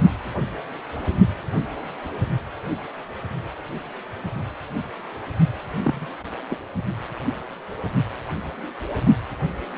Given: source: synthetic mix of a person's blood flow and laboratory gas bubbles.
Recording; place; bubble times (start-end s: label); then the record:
Doppler ultrasound of blood flow; precordium
5.83-6.09 s: bubbles
6.50-6.60 s: bubbles
From the record:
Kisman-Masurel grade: 111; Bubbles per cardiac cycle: 1 to 2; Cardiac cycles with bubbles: 1 to 10%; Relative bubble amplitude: barely perceptible (0.100 to 0.250); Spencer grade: 1 (occasional bubble signal discernible with the cardiac motion signal, with majority of cardiac periods free of bubbles); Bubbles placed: only in the low amplitude regions of the cardiac cycle